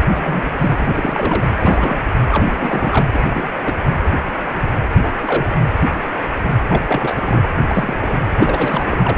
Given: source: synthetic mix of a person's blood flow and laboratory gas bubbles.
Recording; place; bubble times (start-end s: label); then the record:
Doppler ultrasound of blood flow; precordium
0.00-0.04 s: bubbles
0.11-0.42 s: bubbles
0.59-0.76 s: bubbles
0.79-1.50 s: bubbles
1.59-1.98 s: bubbles
2.31-3.08 s: bubbles
3.13-3.23 s: bubbles
3.34-3.48 s: bubbles
3.64-3.73 s: bubbles
5.02-5.12 s: bubbles
5.21-5.48 s: bubbles
6.69-6.83 s: bubbles
6.87-7.42 s: bubbles
7.68-8.19 s: bubbles
8.36-9.15 s: bubbles
From the record:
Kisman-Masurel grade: 232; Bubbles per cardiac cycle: several, 3 to 8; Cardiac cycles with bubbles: 50 to 99%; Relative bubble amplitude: moderate (0.250 to 0.450); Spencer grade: 3 (all of the cardiac periods contain showers or single bubble signals, but not dominating or overriding the cardiac motion signals); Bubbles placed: anywhere in the cardiac cycle